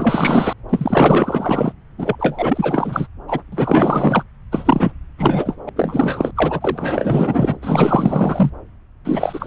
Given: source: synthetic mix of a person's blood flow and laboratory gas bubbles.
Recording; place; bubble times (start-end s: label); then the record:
Doppler ultrasound of blood flow; subclavian vein
0.00-0.53 s: bubbles
0.69-1.73 s: bubbles
1.98-2.15 s: bubbles
2.19-3.07 s: bubbles
3.27-3.41 s: bubbles
3.52-4.23 s: bubbles
4.52-4.92 s: bubbles
5.18-5.57 s: bubbles
5.66-5.69 s: bubbles
5.76-6.31 s: bubbles
6.36-7.57 s: bubbles
7.62-8.51 s: bubbles
9.04-9.47 s: bubbles
From the record:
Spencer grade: 4 (maximum detectable bubble signal sounding continuously throughout systole and diastole of every cardiac period, and overriding the amplitude of the normal cardiac signals); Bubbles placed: anywhere in the cardiac cycle